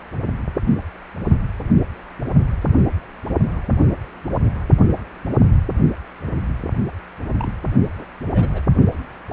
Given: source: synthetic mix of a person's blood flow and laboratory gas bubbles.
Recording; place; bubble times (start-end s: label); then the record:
Doppler ultrasound of blood flow; precordium
7.38-7.53 s: bubbles
7.98-8.05 s: bubbles
8.33-8.62 s: bubbles
9.29-9.33 s: bubbles
From the record:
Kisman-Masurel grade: 121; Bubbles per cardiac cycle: 1 to 2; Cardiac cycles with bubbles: 10 to 50%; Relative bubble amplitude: barely perceptible (0.100 to 0.250); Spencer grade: 2 (many but less than half of the cardiac periods contain bubble signals, singularly or in groups); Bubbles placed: only in the low amplitude regions of the cardiac cycle